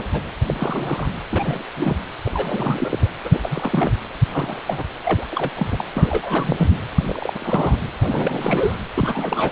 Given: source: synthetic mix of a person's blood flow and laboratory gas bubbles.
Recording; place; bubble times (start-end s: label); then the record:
Doppler ultrasound of blood flow; precordium
0.00-0.04 s: bubbles
0.13-0.22 s: bubbles
0.46-1.07 s: bubbles
1.32-1.63 s: bubbles
1.76-1.97 s: bubbles
2.25-2.31 s: bubbles
2.33-3.08 s: bubbles
3.24-3.39 s: bubbles
3.44-3.93 s: bubbles
4.32-4.62 s: bubbles
4.67-4.84 s: bubbles
5.04-5.25 s: bubbles
5.31-5.51 s: bubbles
5.55-5.84 s: bubbles
5.95-6.55 s: bubbles
6.58-6.70 s: bubbles
6.95-7.75 s: bubbles
7.98-8.75 s: bubbles
8.94-9.52 s: bubbles
From the record:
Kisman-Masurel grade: 232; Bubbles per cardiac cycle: several, 3 to 8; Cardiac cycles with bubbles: 50 to 99%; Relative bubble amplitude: moderate (0.250 to 0.450); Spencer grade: 3 (all of the cardiac periods contain showers or single bubble signals, but not dominating or overriding the cardiac motion signals); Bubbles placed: anywhere in the cardiac cycle